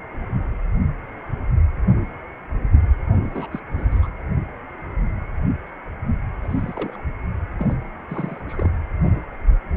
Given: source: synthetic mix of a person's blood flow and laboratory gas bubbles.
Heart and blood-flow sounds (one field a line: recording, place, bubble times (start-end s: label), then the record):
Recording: Doppler ultrasound of blood flow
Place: precordium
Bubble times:
3.23-3.60 s: bubbles
3.77-3.86 s: bubbles
3.91-4.08 s: bubbles
6.41-7.00 s: bubbles
7.58-7.76 s: bubbles
8.09-8.44 s: bubbles
8.49-8.71 s: bubbles
From the record:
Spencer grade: 2 (many but less than half of the cardiac periods contain bubble signals, singularly or in groups)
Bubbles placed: anywhere in the cardiac cycle